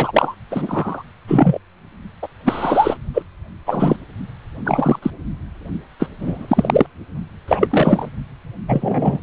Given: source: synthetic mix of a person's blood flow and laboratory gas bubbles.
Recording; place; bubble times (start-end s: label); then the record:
Doppler ultrasound of blood flow; precordium
0.00-0.36 s: bubbles
0.51-1.03 s: bubbles
1.27-1.59 s: bubbles
2.22-2.27 s: bubbles
2.45-2.97 s: bubbles
3.13-3.22 s: bubbles
3.67-3.97 s: bubbles
4.65-4.99 s: bubbles
5.02-5.10 s: bubbles
5.99-6.08 s: bubbles
6.21-6.87 s: bubbles
7.47-8.09 s: bubbles
8.68-9.19 s: bubbles
From the record:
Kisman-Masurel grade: 243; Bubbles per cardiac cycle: several, 3 to 8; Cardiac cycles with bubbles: 100%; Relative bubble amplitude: loud (0.450 to 0.775); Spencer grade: 3 (all of the cardiac periods contain showers or single bubble signals, but not dominating or overriding the cardiac motion signals); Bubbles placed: only in the low amplitude regions of the cardiac cycle